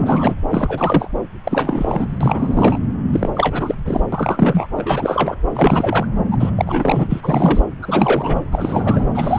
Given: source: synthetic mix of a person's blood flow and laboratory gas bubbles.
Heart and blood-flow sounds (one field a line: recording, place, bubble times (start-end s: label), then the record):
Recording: Doppler ultrasound of blood flow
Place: subclavian vein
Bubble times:
0.00-0.35 s: bubbles
0.48-1.08 s: bubbles
1.44-2.18 s: bubbles
2.21-2.79 s: bubbles
3.12-3.29 s: bubbles
3.35-3.75 s: bubbles
3.86-4.00 s: bubbles
4.12-4.68 s: bubbles
4.76-5.35 s: bubbles
5.54-6.06 s: bubbles
6.31-6.37 s: bubbles
6.40-7.65 s: bubbles
7.82-8.45 s: bubbles
8.52-9.07 s: bubbles
9.14-9.39 s: bubbles
From the record:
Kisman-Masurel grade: 343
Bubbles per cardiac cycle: rolling drumbeat, 9 or more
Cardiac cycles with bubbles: 100%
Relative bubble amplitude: loud (0.450 to 0.775)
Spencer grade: 3 (all of the cardiac periods contain showers or single bubble signals, but not dominating or overriding the cardiac motion signals)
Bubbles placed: anywhere in the cardiac cycle